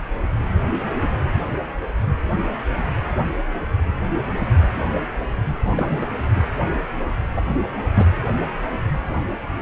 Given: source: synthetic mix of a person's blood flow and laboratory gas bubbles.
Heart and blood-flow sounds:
Doppler ultrasound of blood flow; precordium
5.66-6.12 s: bubbles
6.32-6.42 s: bubbles
7.36-7.41 s: bubbles
7.49-7.68 s: bubbles
7.77-7.82 s: bubbles
7.94-8.05 s: bubbles
From the record:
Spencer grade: 1 (occasional bubble signal discernible with the cardiac motion signal, with majority of cardiac periods free of bubbles); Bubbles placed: anywhere in the cardiac cycle

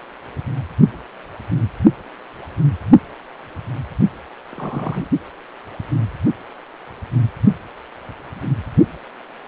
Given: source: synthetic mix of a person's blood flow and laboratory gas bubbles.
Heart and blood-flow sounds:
Doppler ultrasound of blood flow; precordium
4.51-5.08 s: bubbles
From the record:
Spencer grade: 1 (occasional bubble signal discernible with the cardiac motion signal, with majority of cardiac periods free of bubbles); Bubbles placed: only in the low amplitude regions of the cardiac cycle

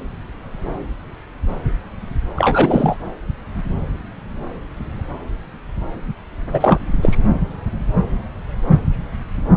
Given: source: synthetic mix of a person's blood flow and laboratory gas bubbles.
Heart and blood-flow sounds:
Doppler ultrasound of blood flow; subclavian vein
2.36-2.96 s: bubbles
6.53-6.79 s: bubbles
7.01-7.17 s: bubbles
From the record:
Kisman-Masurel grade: 213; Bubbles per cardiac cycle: several, 3 to 8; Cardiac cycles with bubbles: 1 to 10%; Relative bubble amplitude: loud (0.450 to 0.775); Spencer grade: 1 (occasional bubble signal discernible with the cardiac motion signal, with majority of cardiac periods free of bubbles); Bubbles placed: anywhere in the cardiac cycle

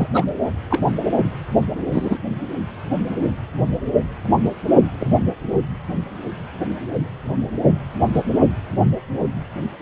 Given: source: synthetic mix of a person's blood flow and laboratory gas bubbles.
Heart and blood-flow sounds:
Doppler ultrasound of blood flow; precordium
0.00-0.09 s: bubbles
0.14-0.25 s: bubbles
0.69-0.80 s: bubbles
1.92-2.19 s: bubbles
5.00-5.17 s: bubbles
8.13-8.23 s: bubbles
From the record:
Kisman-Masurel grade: 122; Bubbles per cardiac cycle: 1 to 2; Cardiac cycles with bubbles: 10 to 50%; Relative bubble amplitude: moderate (0.250 to 0.450); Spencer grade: 2 (many but less than half of the cardiac periods contain bubble signals, singularly or in groups); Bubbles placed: anywhere in the cardiac cycle

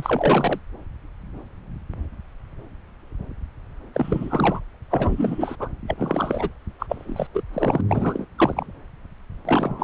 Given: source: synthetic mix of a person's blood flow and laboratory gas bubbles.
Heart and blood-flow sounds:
Doppler ultrasound of blood flow; subclavian vein
0.00-0.60 s: bubbles
3.95-4.60 s: bubbles
4.91-5.55 s: bubbles
5.59-5.68 s: bubbles
5.88-6.50 s: bubbles
6.79-7.27 s: bubbles
7.33-7.42 s: bubbles
7.53-7.81 s: bubbles
7.89-8.27 s: bubbles
8.38-8.66 s: bubbles
9.45-9.84 s: bubbles
From the record:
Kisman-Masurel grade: 332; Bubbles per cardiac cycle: rolling drumbeat, 9 or more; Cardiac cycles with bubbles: 50 to 99%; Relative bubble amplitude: moderate (0.250 to 0.450); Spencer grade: 3 (all of the cardiac periods contain showers or single bubble signals, but not dominating or overriding the cardiac motion signals); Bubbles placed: anywhere in the cardiac cycle

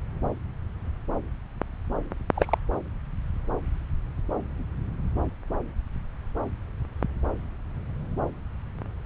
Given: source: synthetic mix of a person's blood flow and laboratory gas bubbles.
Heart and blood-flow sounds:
Doppler ultrasound of blood flow; subclavian vein
2.34-2.58 s: bubbles
From the record:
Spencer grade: 1 (occasional bubble signal discernible with the cardiac motion signal, with majority of cardiac periods free of bubbles); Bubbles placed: anywhere in the cardiac cycle

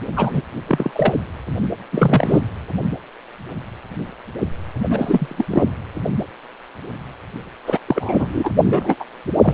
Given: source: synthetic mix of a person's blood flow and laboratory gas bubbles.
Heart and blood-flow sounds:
Doppler ultrasound of blood flow; precordium
0.16-0.42 s: bubbles
0.68-1.15 s: bubbles
1.92-2.40 s: bubbles
4.89-5.45 s: bubbles
5.50-5.63 s: bubbles
7.67-7.79 s: bubbles
7.87-8.50 s: bubbles
8.62-8.95 s: bubbles
9.00-9.04 s: bubbles
9.41-9.54 s: bubbles
From the record:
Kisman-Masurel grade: 233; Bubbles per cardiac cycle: several, 3 to 8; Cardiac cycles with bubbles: 50 to 99%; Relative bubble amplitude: loud (0.450 to 0.775); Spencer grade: 3 (all of the cardiac periods contain showers or single bubble signals, but not dominating or overriding the cardiac motion signals); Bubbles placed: anywhere in the cardiac cycle

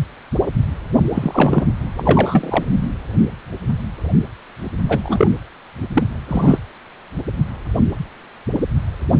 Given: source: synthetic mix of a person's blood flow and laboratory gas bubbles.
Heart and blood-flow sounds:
Doppler ultrasound of blood flow; precordium
1.14-1.67 s: bubbles
1.97-2.66 s: bubbles
2.81-2.88 s: bubbles
4.88-5.28 s: bubbles
5.93-6.03 s: bubbles
6.28-6.59 s: bubbles
From the record:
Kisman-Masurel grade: 223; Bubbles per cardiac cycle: several, 3 to 8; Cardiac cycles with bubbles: 10 to 50%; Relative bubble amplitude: loud (0.450 to 0.775); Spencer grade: 2 (many but less than half of the cardiac periods contain bubble signals, singularly or in groups); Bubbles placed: anywhere in the cardiac cycle

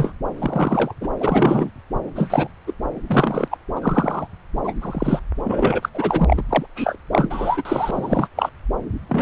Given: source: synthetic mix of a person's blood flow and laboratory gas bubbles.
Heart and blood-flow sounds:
Doppler ultrasound of blood flow; subclavian vein
0.00-0.12 s: bubbles
0.40-0.94 s: bubbles
1.01-1.09 s: bubbles
1.20-1.70 s: bubbles
2.15-2.48 s: bubbles
2.67-2.73 s: bubbles
3.07-3.48 s: bubbles
3.50-3.58 s: bubbles
3.76-4.27 s: bubbles
4.63-4.73 s: bubbles
4.81-5.21 s: bubbles
5.44-5.89 s: bubbles
5.94-6.42 s: bubbles
6.49-6.66 s: bubbles
6.75-6.98 s: bubbles
7.12-8.28 s: bubbles
8.36-8.50 s: bubbles
9.09-9.22 s: bubbles
From the record:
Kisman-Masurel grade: 243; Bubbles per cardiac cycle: several, 3 to 8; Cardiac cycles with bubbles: 100%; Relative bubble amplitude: loud (0.450 to 0.775); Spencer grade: 3 (all of the cardiac periods contain showers or single bubble signals, but not dominating or overriding the cardiac motion signals); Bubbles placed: anywhere in the cardiac cycle

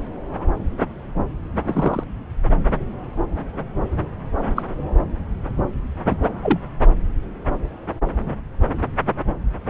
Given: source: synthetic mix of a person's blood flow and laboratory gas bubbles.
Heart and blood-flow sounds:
Doppler ultrasound of blood flow; subclavian vein
1.64-2.04 s: bubbles
4.55-4.62 s: bubbles
6.06-6.16 s: bubbles
6.43-6.59 s: bubbles
From the record:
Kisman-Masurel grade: 122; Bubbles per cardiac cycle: 1 to 2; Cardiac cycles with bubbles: 10 to 50%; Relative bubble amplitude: moderate (0.250 to 0.450); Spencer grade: 2 (many but less than half of the cardiac periods contain bubble signals, singularly or in groups); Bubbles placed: anywhere in the cardiac cycle

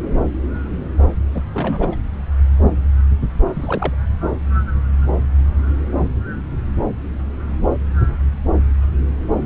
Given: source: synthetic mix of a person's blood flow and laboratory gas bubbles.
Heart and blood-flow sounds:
Doppler ultrasound of blood flow; subclavian vein
1.34-1.42 s: bubbles
1.53-1.96 s: bubbles
3.54-3.94 s: bubbles
From the record:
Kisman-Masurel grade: 211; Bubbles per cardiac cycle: several, 3 to 8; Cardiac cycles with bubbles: 1 to 10%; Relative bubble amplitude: barely perceptible (0.100 to 0.250); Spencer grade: 1 (occasional bubble signal discernible with the cardiac motion signal, with majority of cardiac periods free of bubbles); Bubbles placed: anywhere in the cardiac cycle

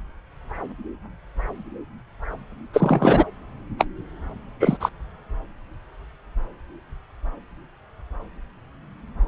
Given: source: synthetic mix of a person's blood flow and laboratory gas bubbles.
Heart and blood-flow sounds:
Doppler ultrasound of blood flow; subclavian vein
2.73-3.25 s: bubbles
3.78-3.85 s: bubbles
4.60-4.77 s: bubbles
4.80-4.89 s: bubbles
From the record:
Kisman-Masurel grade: 223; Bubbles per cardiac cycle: several, 3 to 8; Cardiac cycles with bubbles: 10 to 50%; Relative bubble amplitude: loud (0.450 to 0.775); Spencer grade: 2 (many but less than half of the cardiac periods contain bubble signals, singularly or in groups); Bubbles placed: anywhere in the cardiac cycle

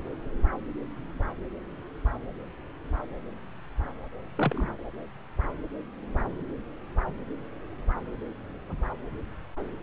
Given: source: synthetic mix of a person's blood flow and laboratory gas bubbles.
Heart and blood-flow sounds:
Doppler ultrasound of blood flow; subclavian vein
4.37-4.71 s: bubbles
From the record:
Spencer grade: 1 (occasional bubble signal discernible with the cardiac motion signal, with majority of cardiac periods free of bubbles); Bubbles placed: anywhere in the cardiac cycle

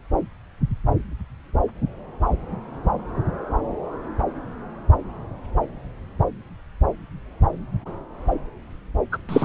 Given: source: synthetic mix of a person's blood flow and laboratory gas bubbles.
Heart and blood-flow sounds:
Doppler ultrasound of blood flow; subclavian vein
9.12-9.17 s: bubbles
9.29-9.45 s: bubbles
From the record:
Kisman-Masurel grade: 113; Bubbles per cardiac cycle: 1 to 2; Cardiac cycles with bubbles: 1 to 10%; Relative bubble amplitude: loud (0.450 to 0.775); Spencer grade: 1 (occasional bubble signal discernible with the cardiac motion signal, with majority of cardiac periods free of bubbles); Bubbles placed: anywhere in the cardiac cycle

